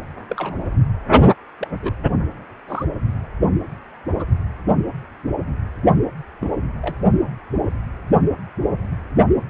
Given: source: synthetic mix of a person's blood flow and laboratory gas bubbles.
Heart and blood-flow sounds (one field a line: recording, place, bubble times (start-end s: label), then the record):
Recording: Doppler ultrasound of blood flow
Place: precordium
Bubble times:
0.29-0.57 s: bubbles
1.59-1.68 s: bubbles
1.81-1.93 s: bubbles
2.68-2.85 s: bubbles
4.07-4.24 s: bubbles
6.41-6.50 s: bubbles
6.81-6.96 s: bubbles
From the record:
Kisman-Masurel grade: 121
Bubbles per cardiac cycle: 1 to 2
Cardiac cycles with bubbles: 10 to 50%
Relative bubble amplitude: barely perceptible (0.100 to 0.250)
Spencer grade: 2 (many but less than half of the cardiac periods contain bubble signals, singularly or in groups)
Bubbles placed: only in the low amplitude regions of the cardiac cycle